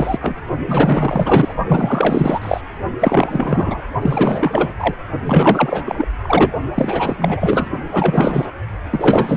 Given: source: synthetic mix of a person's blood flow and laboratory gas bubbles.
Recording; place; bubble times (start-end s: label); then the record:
Doppler ultrasound of blood flow; precordium
0.00-0.19 s: bubbles
0.22-0.37 s: bubbles
0.68-1.55 s: bubbles
1.68-2.61 s: bubbles
2.99-3.82 s: bubbles
4.02-4.74 s: bubbles
4.78-4.95 s: bubbles
5.24-6.06 s: bubbles
6.23-6.52 s: bubbles
6.75-7.70 s: bubbles
7.92-8.51 s: bubbles
8.90-9.37 s: bubbles
From the record:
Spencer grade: 4 (maximum detectable bubble signal sounding continuously throughout systole and diastole of every cardiac period, and overriding the amplitude of the normal cardiac signals); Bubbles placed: only in the low amplitude regions of the cardiac cycle